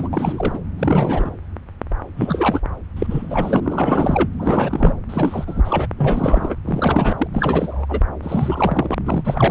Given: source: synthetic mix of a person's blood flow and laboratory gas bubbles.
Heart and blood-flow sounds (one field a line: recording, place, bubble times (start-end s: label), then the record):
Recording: Doppler ultrasound of blood flow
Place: subclavian vein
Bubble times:
0.00-0.08 s: bubbles
0.13-0.59 s: bubbles
0.78-1.36 s: bubbles
2.17-2.60 s: bubbles
2.96-3.60 s: bubbles
3.62-4.29 s: bubbles
4.39-4.94 s: bubbles
5.09-5.87 s: bubbles
5.97-6.56 s: bubbles
6.65-7.28 s: bubbles
7.33-7.86 s: bubbles
7.89-8.00 s: bubbles
8.22-8.95 s: bubbles
9.05-9.22 s: bubbles
9.25-9.51 s: bubbles
From the record:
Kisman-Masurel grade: 343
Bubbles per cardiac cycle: rolling drumbeat, 9 or more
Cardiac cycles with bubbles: 100%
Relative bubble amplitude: loud (0.450 to 0.775)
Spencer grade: 3 (all of the cardiac periods contain showers or single bubble signals, but not dominating or overriding the cardiac motion signals)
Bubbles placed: anywhere in the cardiac cycle